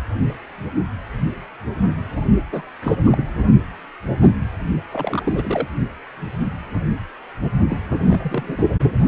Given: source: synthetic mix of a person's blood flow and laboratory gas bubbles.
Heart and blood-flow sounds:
Doppler ultrasound of blood flow; precordium
2.52-2.62 s: bubbles
2.81-2.95 s: bubbles
3.06-3.25 s: bubbles
4.92-5.21 s: bubbles
5.23-5.67 s: bubbles
7.70-7.77 s: bubbles
7.90-8.64 s: bubbles
8.99-9.08 s: bubbles
From the record:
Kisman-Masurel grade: 222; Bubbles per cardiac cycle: several, 3 to 8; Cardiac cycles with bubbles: 10 to 50%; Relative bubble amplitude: moderate (0.250 to 0.450); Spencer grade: 2 (many but less than half of the cardiac periods contain bubble signals, singularly or in groups); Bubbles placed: only in the low amplitude regions of the cardiac cycle

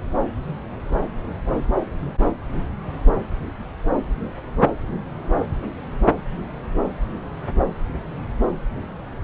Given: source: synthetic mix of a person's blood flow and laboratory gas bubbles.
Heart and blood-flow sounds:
Doppler ultrasound of blood flow; subclavian vein
no bubbles
From the record:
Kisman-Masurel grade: 000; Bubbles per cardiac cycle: 0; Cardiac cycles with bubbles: 0%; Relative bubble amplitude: no bubbles discernible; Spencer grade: 0 (complete lack of bubble signals)

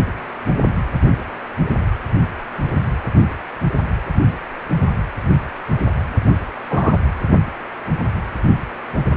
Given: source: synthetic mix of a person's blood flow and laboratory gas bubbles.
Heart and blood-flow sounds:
Doppler ultrasound of blood flow; precordium
6.70-6.97 s: bubbles
From the record:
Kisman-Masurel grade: 113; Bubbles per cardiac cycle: 1 to 2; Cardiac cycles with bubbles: 1 to 10%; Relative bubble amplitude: loud (0.450 to 0.775); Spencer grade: 1 (occasional bubble signal discernible with the cardiac motion signal, with majority of cardiac periods free of bubbles); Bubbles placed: anywhere in the cardiac cycle

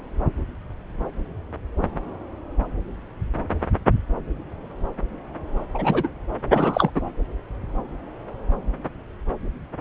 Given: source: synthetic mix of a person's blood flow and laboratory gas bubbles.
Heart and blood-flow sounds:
Doppler ultrasound of blood flow; subclavian vein
5.74-6.08 s: bubbles
6.53-6.91 s: bubbles
6.95-7.00 s: bubbles
From the record:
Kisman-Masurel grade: 213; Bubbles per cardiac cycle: several, 3 to 8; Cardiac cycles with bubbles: 1 to 10%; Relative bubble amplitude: loud (0.450 to 0.775); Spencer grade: 1 (occasional bubble signal discernible with the cardiac motion signal, with majority of cardiac periods free of bubbles); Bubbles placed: anywhere in the cardiac cycle

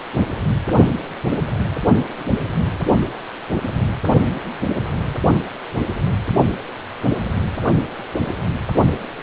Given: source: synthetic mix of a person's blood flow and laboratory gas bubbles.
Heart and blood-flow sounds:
Doppler ultrasound of blood flow; precordium
2.17-2.24 s: bubbles
From the record:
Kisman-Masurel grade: 111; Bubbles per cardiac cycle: 1 to 2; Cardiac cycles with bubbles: 1 to 10%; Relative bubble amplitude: barely perceptible (0.100 to 0.250); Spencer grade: 1 (occasional bubble signal discernible with the cardiac motion signal, with majority of cardiac periods free of bubbles); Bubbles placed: only in the low amplitude regions of the cardiac cycle

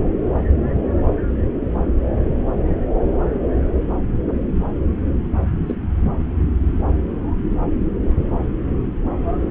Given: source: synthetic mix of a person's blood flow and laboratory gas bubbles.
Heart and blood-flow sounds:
Doppler ultrasound of blood flow; subclavian vein
5.66-5.75 s: bubbles
From the record:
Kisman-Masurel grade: 111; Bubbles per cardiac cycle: 1 to 2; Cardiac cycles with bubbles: 1 to 10%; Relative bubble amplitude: barely perceptible (0.100 to 0.250); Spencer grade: 1 (occasional bubble signal discernible with the cardiac motion signal, with majority of cardiac periods free of bubbles); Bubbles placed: anywhere in the cardiac cycle

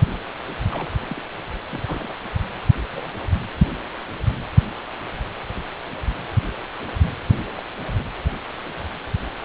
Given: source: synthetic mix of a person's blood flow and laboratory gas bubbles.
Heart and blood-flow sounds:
Doppler ultrasound of blood flow; precordium
0.72-0.91 s: bubbles
1.09-1.22 s: bubbles
1.70-2.16 s: bubbles
2.92-3.10 s: bubbles
7.57-7.61 s: bubbles
7.96-8.03 s: bubbles
From the record:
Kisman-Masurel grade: 121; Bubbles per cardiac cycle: 1 to 2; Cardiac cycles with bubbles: 10 to 50%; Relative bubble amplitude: barely perceptible (0.100 to 0.250); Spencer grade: 2 (many but less than half of the cardiac periods contain bubble signals, singularly or in groups); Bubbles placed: anywhere in the cardiac cycle

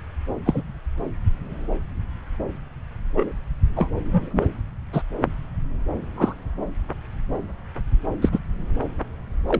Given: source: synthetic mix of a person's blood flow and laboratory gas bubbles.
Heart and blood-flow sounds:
Doppler ultrasound of blood flow; subclavian vein
0.45-0.62 s: bubbles
3.16-3.31 s: bubbles
3.76-3.88 s: bubbles
4.04-4.46 s: bubbles
4.92-5.03 s: bubbles
6.16-6.34 s: bubbles
8.21-8.29 s: bubbles
8.32-8.39 s: bubbles
9.48-9.60 s: bubbles
From the record:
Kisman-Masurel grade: 122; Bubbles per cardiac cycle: 1 to 2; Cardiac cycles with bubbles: 10 to 50%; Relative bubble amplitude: moderate (0.250 to 0.450); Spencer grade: 2 (many but less than half of the cardiac periods contain bubble signals, singularly or in groups); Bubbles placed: anywhere in the cardiac cycle

